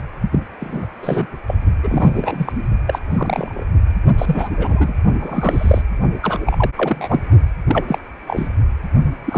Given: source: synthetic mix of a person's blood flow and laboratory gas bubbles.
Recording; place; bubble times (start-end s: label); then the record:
Doppler ultrasound of blood flow; precordium
0.00-0.02 s: bubbles
0.32-0.39 s: bubbles
0.59-0.87 s: bubbles
1.03-1.27 s: bubbles
1.47-1.55 s: bubbles
1.83-2.52 s: bubbles
2.87-3.00 s: bubbles
3.10-3.64 s: bubbles
4.18-4.49 s: bubbles
4.57-4.94 s: bubbles
5.18-5.81 s: bubbles
6.22-6.39 s: bubbles
6.46-6.71 s: bubbles
6.77-7.21 s: bubbles
7.66-7.84 s: bubbles
7.88-7.98 s: bubbles
8.27-8.49 s: bubbles
9.25-9.38 s: bubbles
From the record:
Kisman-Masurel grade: 242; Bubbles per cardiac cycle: several, 3 to 8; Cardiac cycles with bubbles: 100%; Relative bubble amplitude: moderate (0.250 to 0.450); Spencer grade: 3 (all of the cardiac periods contain showers or single bubble signals, but not dominating or overriding the cardiac motion signals); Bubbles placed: only in the low amplitude regions of the cardiac cycle